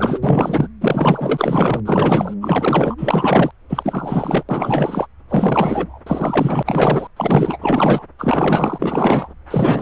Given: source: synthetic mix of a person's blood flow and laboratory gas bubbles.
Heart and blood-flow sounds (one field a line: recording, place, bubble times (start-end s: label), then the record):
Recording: Doppler ultrasound of blood flow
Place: subclavian vein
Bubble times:
0.00-0.20 s: bubbles
0.22-0.68 s: bubbles
0.81-1.80 s: bubbles
1.85-2.34 s: bubbles
2.41-2.95 s: bubbles
2.98-3.51 s: bubbles
3.69-4.44 s: bubbles
4.49-5.07 s: bubbles
5.29-6.01 s: bubbles
6.06-7.07 s: bubbles
7.16-7.58 s: bubbles
7.61-8.04 s: bubbles
8.18-9.28 s: bubbles
9.50-9.82 s: bubbles
From the record:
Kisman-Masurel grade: 444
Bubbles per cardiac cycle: continuous sound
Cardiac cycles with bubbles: 100%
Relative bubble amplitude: maximal (0.775 to 0.999)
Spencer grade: 4 (maximum detectable bubble signal sounding continuously throughout systole and diastole of every cardiac period, and overriding the amplitude of the normal cardiac signals)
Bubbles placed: anywhere in the cardiac cycle